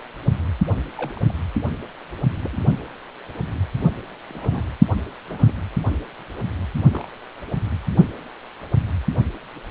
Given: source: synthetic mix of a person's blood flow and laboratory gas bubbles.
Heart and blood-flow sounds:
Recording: Doppler ultrasound of blood flow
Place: precordium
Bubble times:
0.95-1.19 s: bubbles
1.29-1.34 s: bubbles
2.43-2.49 s: bubbles
2.52-2.56 s: bubbles
4.29-4.66 s: bubbles
5.29-5.53 s: bubbles
6.92-7.08 s: bubbles
From the record:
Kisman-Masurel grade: 121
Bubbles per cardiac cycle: 1 to 2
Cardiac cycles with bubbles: 10 to 50%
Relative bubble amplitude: barely perceptible (0.100 to 0.250)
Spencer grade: 2 (many but less than half of the cardiac periods contain bubble signals, singularly or in groups)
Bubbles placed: only in the low amplitude regions of the cardiac cycle

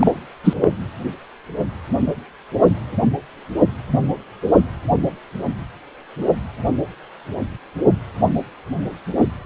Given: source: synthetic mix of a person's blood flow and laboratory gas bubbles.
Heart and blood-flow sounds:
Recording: Doppler ultrasound of blood flow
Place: precordium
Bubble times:
0.00-0.12 s: bubbles
0.44-0.54 s: bubbles
0.60-0.72 s: bubbles
From the record:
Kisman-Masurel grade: 213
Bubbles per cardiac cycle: several, 3 to 8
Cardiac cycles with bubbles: 1 to 10%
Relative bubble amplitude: loud (0.450 to 0.775)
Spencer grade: 1 (occasional bubble signal discernible with the cardiac motion signal, with majority of cardiac periods free of bubbles)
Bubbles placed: anywhere in the cardiac cycle

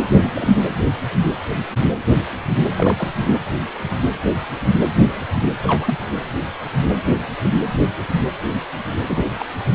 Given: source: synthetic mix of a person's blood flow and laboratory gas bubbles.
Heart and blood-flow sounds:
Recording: Doppler ultrasound of blood flow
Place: precordium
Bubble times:
0.20-0.64 s: bubbles
2.76-3.07 s: bubbles
3.15-3.37 s: bubbles
5.64-5.95 s: bubbles
9.08-9.25 s: bubbles
9.39-9.45 s: bubbles
From the record:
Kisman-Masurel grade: 222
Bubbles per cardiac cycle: several, 3 to 8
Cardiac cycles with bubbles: 10 to 50%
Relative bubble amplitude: moderate (0.250 to 0.450)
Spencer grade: 2 (many but less than half of the cardiac periods contain bubble signals, singularly or in groups)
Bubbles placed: anywhere in the cardiac cycle

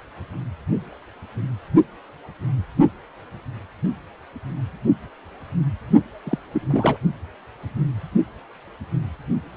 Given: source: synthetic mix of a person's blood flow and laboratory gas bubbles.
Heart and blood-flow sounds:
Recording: Doppler ultrasound of blood flow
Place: precordium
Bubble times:
6.25-6.38 s: bubbles
6.52-6.97 s: bubbles
From the record:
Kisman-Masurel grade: 212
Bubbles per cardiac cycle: several, 3 to 8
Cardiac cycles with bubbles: 1 to 10%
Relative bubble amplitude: moderate (0.250 to 0.450)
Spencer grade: 1 (occasional bubble signal discernible with the cardiac motion signal, with majority of cardiac periods free of bubbles)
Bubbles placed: only in the low amplitude regions of the cardiac cycle

